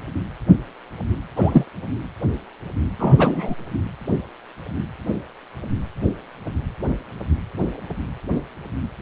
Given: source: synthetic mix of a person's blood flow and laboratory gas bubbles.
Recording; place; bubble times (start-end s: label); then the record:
Doppler ultrasound of blood flow; precordium
1.36-1.64 s: bubbles
2.99-3.54 s: bubbles
From the record:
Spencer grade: 2 (many but less than half of the cardiac periods contain bubble signals, singularly or in groups); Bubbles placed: anywhere in the cardiac cycle